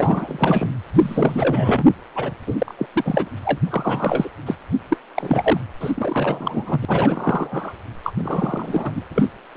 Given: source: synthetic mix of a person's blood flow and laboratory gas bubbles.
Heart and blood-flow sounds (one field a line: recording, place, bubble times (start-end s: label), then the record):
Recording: Doppler ultrasound of blood flow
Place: precordium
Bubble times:
0.00-0.70 s: bubbles
0.93-1.83 s: bubbles
2.15-2.31 s: bubbles
2.46-2.55 s: bubbles
2.58-2.75 s: bubbles
2.78-2.86 s: bubbles
2.93-3.29 s: bubbles
3.44-3.60 s: bubbles
3.70-4.29 s: bubbles
4.46-4.57 s: bubbles
4.88-4.97 s: bubbles
5.14-5.61 s: bubbles
5.80-5.92 s: bubbles
5.95-7.72 s: bubbles
8.04-8.12 s: bubbles
8.19-8.92 s: bubbles
8.95-9.02 s: bubbles
9.12-9.31 s: bubbles
9.55-9.57 s: bubbles
From the record:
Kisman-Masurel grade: 333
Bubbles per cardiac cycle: rolling drumbeat, 9 or more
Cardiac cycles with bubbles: 50 to 99%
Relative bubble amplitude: loud (0.450 to 0.775)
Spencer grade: 3 (all of the cardiac periods contain showers or single bubble signals, but not dominating or overriding the cardiac motion signals)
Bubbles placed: anywhere in the cardiac cycle